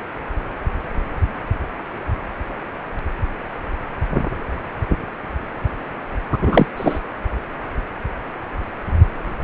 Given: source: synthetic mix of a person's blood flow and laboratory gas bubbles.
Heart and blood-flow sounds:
Doppler ultrasound of blood flow; precordium
6.32-6.37 s: bubbles
6.42-6.67 s: bubbles
6.76-6.98 s: bubbles
From the record:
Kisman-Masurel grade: 213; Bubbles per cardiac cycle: several, 3 to 8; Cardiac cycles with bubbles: 1 to 10%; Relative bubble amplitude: loud (0.450 to 0.775); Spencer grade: 1 (occasional bubble signal discernible with the cardiac motion signal, with majority of cardiac periods free of bubbles); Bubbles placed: anywhere in the cardiac cycle

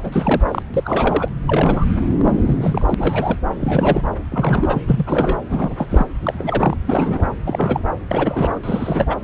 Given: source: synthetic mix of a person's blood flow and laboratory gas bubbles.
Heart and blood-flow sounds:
Doppler ultrasound of blood flow; subclavian vein
0.00-0.41 s: bubbles
0.48-0.62 s: bubbles
0.74-1.29 s: bubbles
1.48-1.85 s: bubbles
2.17-2.94 s: bubbles
2.97-3.38 s: bubbles
3.53-4.04 s: bubbles
4.32-4.81 s: bubbles
4.87-5.39 s: bubbles
5.50-6.06 s: bubbles
6.23-6.76 s: bubbles
6.87-7.27 s: bubbles
7.46-7.83 s: bubbles
8.11-8.60 s: bubbles
8.63-9.17 s: bubbles
From the record:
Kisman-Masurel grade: 342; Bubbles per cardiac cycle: rolling drumbeat, 9 or more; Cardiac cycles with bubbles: 100%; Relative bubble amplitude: moderate (0.250 to 0.450); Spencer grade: 3 (all of the cardiac periods contain showers or single bubble signals, but not dominating or overriding the cardiac motion signals); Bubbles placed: anywhere in the cardiac cycle

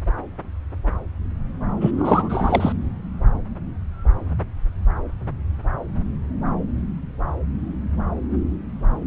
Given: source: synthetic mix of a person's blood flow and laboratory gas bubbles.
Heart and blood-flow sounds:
Doppler ultrasound of blood flow; subclavian vein
1.80-1.91 s: bubbles
1.97-2.72 s: bubbles
From the record:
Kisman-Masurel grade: 213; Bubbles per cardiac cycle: several, 3 to 8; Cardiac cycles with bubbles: 1 to 10%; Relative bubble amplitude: loud (0.450 to 0.775); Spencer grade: 1 (occasional bubble signal discernible with the cardiac motion signal, with majority of cardiac periods free of bubbles); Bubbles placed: anywhere in the cardiac cycle

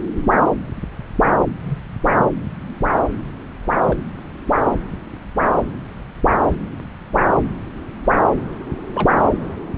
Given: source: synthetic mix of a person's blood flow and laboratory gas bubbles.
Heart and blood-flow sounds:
Doppler ultrasound of blood flow; subclavian vein
1.65-1.80 s: bubbles
3.85-3.97 s: bubbles
8.94-9.25 s: bubbles
From the record:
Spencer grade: 2 (many but less than half of the cardiac periods contain bubble signals, singularly or in groups); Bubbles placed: anywhere in the cardiac cycle

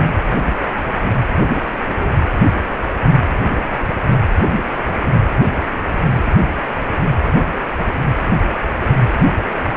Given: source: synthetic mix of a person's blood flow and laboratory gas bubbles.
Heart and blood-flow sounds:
Doppler ultrasound of blood flow; precordium
0.29-0.52 s: bubbles
1.88-2.12 s: bubbles
3.70-4.13 s: bubbles
From the record:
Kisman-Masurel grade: 121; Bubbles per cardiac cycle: 1 to 2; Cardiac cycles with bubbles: 10 to 50%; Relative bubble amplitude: barely perceptible (0.100 to 0.250); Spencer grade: 2 (many but less than half of the cardiac periods contain bubble signals, singularly or in groups); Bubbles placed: anywhere in the cardiac cycle

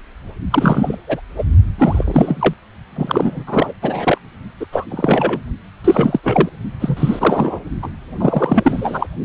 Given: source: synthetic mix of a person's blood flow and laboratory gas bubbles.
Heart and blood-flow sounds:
Doppler ultrasound of blood flow; precordium
0.51-0.96 s: bubbles
1.07-1.20 s: bubbles
1.36-1.44 s: bubbles
1.78-2.54 s: bubbles
2.96-3.44 s: bubbles
3.47-3.74 s: bubbles
3.82-4.18 s: bubbles
4.60-4.66 s: bubbles
4.72-4.84 s: bubbles
4.91-5.40 s: bubbles
5.84-6.20 s: bubbles
6.23-6.49 s: bubbles
6.80-7.59 s: bubbles
7.83-7.90 s: bubbles
8.18-9.07 s: bubbles
From the record:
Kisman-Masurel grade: 343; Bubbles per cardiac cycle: rolling drumbeat, 9 or more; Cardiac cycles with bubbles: 100%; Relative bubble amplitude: loud (0.450 to 0.775); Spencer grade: 3 (all of the cardiac periods contain showers or single bubble signals, but not dominating or overriding the cardiac motion signals); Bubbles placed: only in the low amplitude regions of the cardiac cycle

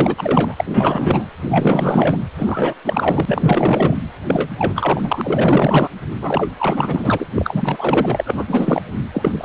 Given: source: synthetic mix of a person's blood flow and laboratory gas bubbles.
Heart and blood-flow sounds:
Doppler ultrasound of blood flow; precordium
0.00-1.26 s: bubbles
1.48-2.17 s: bubbles
2.37-2.73 s: bubbles
2.85-3.99 s: bubbles
4.27-4.49 s: bubbles
4.58-5.88 s: bubbles
6.21-6.53 s: bubbles
6.58-7.27 s: bubbles
7.35-8.44 s: bubbles
8.47-8.82 s: bubbles
9.13-9.45 s: bubbles
From the record:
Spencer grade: 4 (maximum detectable bubble signal sounding continuously throughout systole and diastole of every cardiac period, and overriding the amplitude of the normal cardiac signals); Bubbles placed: anywhere in the cardiac cycle

